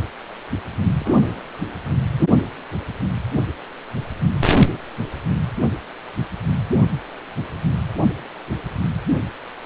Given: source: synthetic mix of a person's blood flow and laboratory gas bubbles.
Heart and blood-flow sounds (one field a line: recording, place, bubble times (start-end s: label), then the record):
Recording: Doppler ultrasound of blood flow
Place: precordium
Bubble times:
0.99-1.42 s: bubbles
From the record:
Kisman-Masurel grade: 121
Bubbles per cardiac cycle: 1 to 2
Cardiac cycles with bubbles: 10 to 50%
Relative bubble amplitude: barely perceptible (0.100 to 0.250)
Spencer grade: 2 (many but less than half of the cardiac periods contain bubble signals, singularly or in groups)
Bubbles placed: anywhere in the cardiac cycle